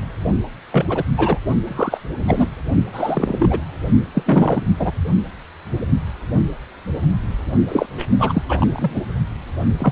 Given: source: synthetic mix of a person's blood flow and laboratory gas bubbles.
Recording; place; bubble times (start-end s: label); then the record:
Doppler ultrasound of blood flow; precordium
0.72-0.85 s: bubbles
0.89-1.03 s: bubbles
1.18-1.39 s: bubbles
1.63-1.99 s: bubbles
2.19-2.48 s: bubbles
2.93-3.64 s: bubbles
4.14-4.22 s: bubbles
4.26-4.64 s: bubbles
4.79-4.92 s: bubbles
7.68-7.86 s: bubbles
7.98-8.07 s: bubbles
8.19-8.43 s: bubbles
8.49-9.03 s: bubbles
9.79-9.92 s: bubbles
From the record:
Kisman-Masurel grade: 233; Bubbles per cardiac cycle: several, 3 to 8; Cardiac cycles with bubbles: 50 to 99%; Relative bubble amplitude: loud (0.450 to 0.775); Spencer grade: 3 (all of the cardiac periods contain showers or single bubble signals, but not dominating or overriding the cardiac motion signals); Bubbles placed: only in the low amplitude regions of the cardiac cycle